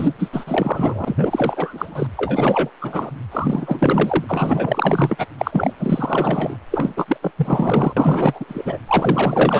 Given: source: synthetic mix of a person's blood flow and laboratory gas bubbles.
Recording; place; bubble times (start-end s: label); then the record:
Doppler ultrasound of blood flow; precordium
0.00-0.14 s: bubbles
0.18-2.07 s: bubbles
2.17-2.71 s: bubbles
2.81-3.10 s: bubbles
3.31-4.25 s: bubbles
4.28-5.27 s: bubbles
5.38-5.74 s: bubbles
5.79-6.57 s: bubbles
6.71-6.93 s: bubbles
6.96-7.17 s: bubbles
7.21-7.31 s: bubbles
7.37-7.94 s: bubbles
7.96-8.46 s: bubbles
8.48-8.79 s: bubbles
8.87-9.60 s: bubbles
From the record:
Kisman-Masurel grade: 444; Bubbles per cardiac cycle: continuous sound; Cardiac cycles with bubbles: 100%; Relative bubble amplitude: maximal (0.775 to 0.999); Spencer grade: 4 (maximum detectable bubble signal sounding continuously throughout systole and diastole of every cardiac period, and overriding the amplitude of the normal cardiac signals); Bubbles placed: anywhere in the cardiac cycle